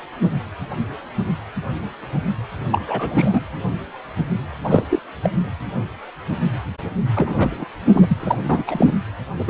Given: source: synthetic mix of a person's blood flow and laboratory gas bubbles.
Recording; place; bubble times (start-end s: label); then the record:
Doppler ultrasound of blood flow; precordium
2.71-2.81 s: bubbles
2.85-3.41 s: bubbles
4.63-4.85 s: bubbles
4.90-4.99 s: bubbles
5.23-5.30 s: bubbles
7.15-7.65 s: bubbles
7.92-8.37 s: bubbles
8.49-8.64 s: bubbles
8.67-8.93 s: bubbles
9.39-9.44 s: bubbles
9.47-9.50 s: bubbles
From the record:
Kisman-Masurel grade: 223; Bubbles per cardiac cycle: several, 3 to 8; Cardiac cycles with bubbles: 10 to 50%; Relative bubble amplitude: loud (0.450 to 0.775); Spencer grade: 2 (many but less than half of the cardiac periods contain bubble signals, singularly or in groups); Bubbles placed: anywhere in the cardiac cycle